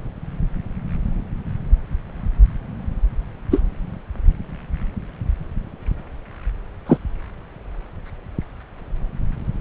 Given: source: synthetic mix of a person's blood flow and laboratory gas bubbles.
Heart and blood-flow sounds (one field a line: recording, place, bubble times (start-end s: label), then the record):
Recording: Doppler ultrasound of blood flow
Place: subclavian vein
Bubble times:
3.50-3.60 s: bubbles
6.86-6.97 s: bubbles
From the record:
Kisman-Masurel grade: 113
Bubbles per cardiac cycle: 1 to 2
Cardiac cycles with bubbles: 1 to 10%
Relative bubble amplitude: loud (0.450 to 0.775)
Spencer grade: 1 (occasional bubble signal discernible with the cardiac motion signal, with majority of cardiac periods free of bubbles)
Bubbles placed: anywhere in the cardiac cycle